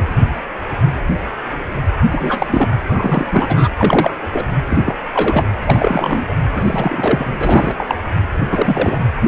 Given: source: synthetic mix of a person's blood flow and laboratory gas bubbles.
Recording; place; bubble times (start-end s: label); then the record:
Doppler ultrasound of blood flow; precordium
0.00-0.04 s: bubbles
2.04-2.69 s: bubbles
2.88-3.26 s: bubbles
3.32-3.69 s: bubbles
3.77-4.11 s: bubbles
4.33-4.46 s: bubbles
4.70-4.96 s: bubbles
5.12-5.48 s: bubbles
5.66-6.25 s: bubbles
6.29-6.34 s: bubbles
6.54-7.29 s: bubbles
7.41-7.75 s: bubbles
7.77-7.95 s: bubbles
8.49-8.97 s: bubbles
9.22-9.28 s: bubbles
From the record:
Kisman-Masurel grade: 333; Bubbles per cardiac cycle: rolling drumbeat, 9 or more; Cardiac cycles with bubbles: 50 to 99%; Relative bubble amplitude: loud (0.450 to 0.775); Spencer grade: 3 (all of the cardiac periods contain showers or single bubble signals, but not dominating or overriding the cardiac motion signals); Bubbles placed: anywhere in the cardiac cycle